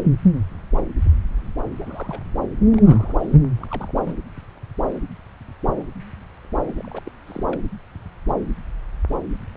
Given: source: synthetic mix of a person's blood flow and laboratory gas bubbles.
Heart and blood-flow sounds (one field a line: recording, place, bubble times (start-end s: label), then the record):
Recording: Doppler ultrasound of blood flow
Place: subclavian vein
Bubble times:
1.80-2.21 s: bubbles
2.69-3.15 s: bubbles
3.19-3.38 s: bubbles
3.60-3.66 s: bubbles
3.70-4.16 s: bubbles
6.77-7.02 s: bubbles
7.05-7.12 s: bubbles
7.27-7.44 s: bubbles
7.47-7.60 s: bubbles
From the record:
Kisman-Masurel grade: 221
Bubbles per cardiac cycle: several, 3 to 8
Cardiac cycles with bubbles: 10 to 50%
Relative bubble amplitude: barely perceptible (0.100 to 0.250)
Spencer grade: 2 (many but less than half of the cardiac periods contain bubble signals, singularly or in groups)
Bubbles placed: anywhere in the cardiac cycle